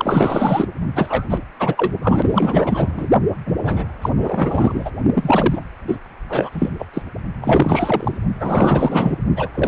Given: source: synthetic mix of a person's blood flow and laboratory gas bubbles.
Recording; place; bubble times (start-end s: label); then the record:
Doppler ultrasound of blood flow; precordium
0.00-0.66 s: bubbles
0.94-1.25 s: bubbles
1.30-1.39 s: bubbles
1.59-1.92 s: bubbles
2.02-3.07 s: bubbles
3.46-3.56 s: bubbles
3.65-3.85 s: bubbles
4.01-4.09 s: bubbles
4.17-4.91 s: bubbles
5.14-5.61 s: bubbles
5.88-5.96 s: bubbles
6.28-6.49 s: bubbles
6.52-6.70 s: bubbles
6.78-6.86 s: bubbles
6.93-7.02 s: bubbles
7.42-8.17 s: bubbles
8.34-9.19 s: bubbles
9.36-9.49 s: bubbles
9.54-9.68 s: bubbles
From the record:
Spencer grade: 4 (maximum detectable bubble signal sounding continuously throughout systole and diastole of every cardiac period, and overriding the amplitude of the normal cardiac signals); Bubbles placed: only in the low amplitude regions of the cardiac cycle